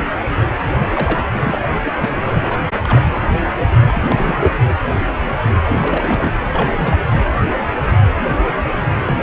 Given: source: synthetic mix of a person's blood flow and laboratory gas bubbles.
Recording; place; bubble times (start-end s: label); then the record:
Doppler ultrasound of blood flow; precordium
0.93-1.23 s: bubbles
1.33-1.59 s: bubbles
1.63-1.70 s: bubbles
1.85-1.91 s: bubbles
2.00-2.58 s: bubbles
2.83-3.02 s: bubbles
3.12-3.23 s: bubbles
3.93-4.57 s: bubbles
5.64-5.78 s: bubbles
5.81-6.35 s: bubbles
6.51-6.97 s: bubbles
7.09-7.24 s: bubbles
9.05-9.23 s: bubbles
From the record:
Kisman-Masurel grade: 332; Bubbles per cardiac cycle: rolling drumbeat, 9 or more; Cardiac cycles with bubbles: 50 to 99%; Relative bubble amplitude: moderate (0.250 to 0.450); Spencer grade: 3 (all of the cardiac periods contain showers or single bubble signals, but not dominating or overriding the cardiac motion signals); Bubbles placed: anywhere in the cardiac cycle